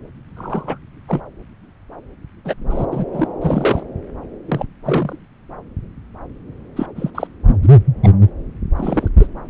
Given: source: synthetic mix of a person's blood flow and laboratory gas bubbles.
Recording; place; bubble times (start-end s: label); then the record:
Doppler ultrasound of blood flow; subclavian vein
0.36-0.78 s: bubbles
1.08-1.23 s: bubbles
2.45-2.55 s: bubbles
2.70-2.86 s: bubbles
2.92-3.05 s: bubbles
3.12-3.27 s: bubbles
3.41-3.83 s: bubbles
4.46-4.66 s: bubbles
4.85-5.17 s: bubbles
6.76-6.86 s: bubbles
6.96-7.10 s: bubbles
7.15-7.27 s: bubbles
7.46-7.59 s: bubbles
7.62-7.70 s: bubbles
8.03-8.09 s: bubbles
8.75-9.08 s: bubbles
9.18-9.27 s: bubbles
From the record:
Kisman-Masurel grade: 233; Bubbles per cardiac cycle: several, 3 to 8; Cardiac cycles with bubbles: 50 to 99%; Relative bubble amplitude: loud (0.450 to 0.775); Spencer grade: 3 (all of the cardiac periods contain showers or single bubble signals, but not dominating or overriding the cardiac motion signals); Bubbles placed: anywhere in the cardiac cycle